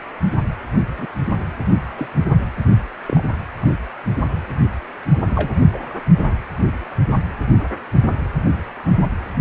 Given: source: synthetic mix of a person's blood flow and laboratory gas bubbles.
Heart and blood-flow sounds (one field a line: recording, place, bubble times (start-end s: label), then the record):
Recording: Doppler ultrasound of blood flow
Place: precordium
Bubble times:
0.98-1.07 s: bubbles
1.97-2.10 s: bubbles
3.08-3.23 s: bubbles
3.62-3.72 s: bubbles
5.29-5.59 s: bubbles
5.72-5.79 s: bubbles
From the record:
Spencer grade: 2 (many but less than half of the cardiac periods contain bubble signals, singularly or in groups)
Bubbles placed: only in the low amplitude regions of the cardiac cycle